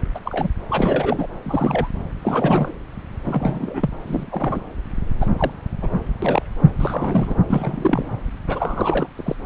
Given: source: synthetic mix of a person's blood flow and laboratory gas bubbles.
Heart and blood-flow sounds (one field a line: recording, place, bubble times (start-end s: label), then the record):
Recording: Doppler ultrasound of blood flow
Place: subclavian vein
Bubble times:
0.14-0.19 s: bubbles
0.24-0.50 s: bubbles
0.69-1.27 s: bubbles
1.43-1.89 s: bubbles
2.21-2.73 s: bubbles
3.25-3.90 s: bubbles
4.07-4.60 s: bubbles
5.21-5.28 s: bubbles
5.37-5.51 s: bubbles
5.82-5.88 s: bubbles
6.22-6.42 s: bubbles
6.79-7.34 s: bubbles
7.49-8.06 s: bubbles
8.47-9.07 s: bubbles
9.15-9.37 s: bubbles
From the record:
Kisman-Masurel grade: 242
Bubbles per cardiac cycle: several, 3 to 8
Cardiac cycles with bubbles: 100%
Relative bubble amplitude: moderate (0.250 to 0.450)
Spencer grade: 3 (all of the cardiac periods contain showers or single bubble signals, but not dominating or overriding the cardiac motion signals)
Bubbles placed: anywhere in the cardiac cycle